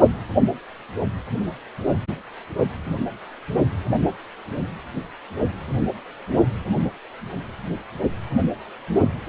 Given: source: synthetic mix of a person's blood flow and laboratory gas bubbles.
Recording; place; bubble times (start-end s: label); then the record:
Doppler ultrasound of blood flow; precordium
no bubbles
From the record:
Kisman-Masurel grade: 000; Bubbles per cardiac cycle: 0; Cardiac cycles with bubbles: 0%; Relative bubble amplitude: no bubbles discernible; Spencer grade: 0 (complete lack of bubble signals)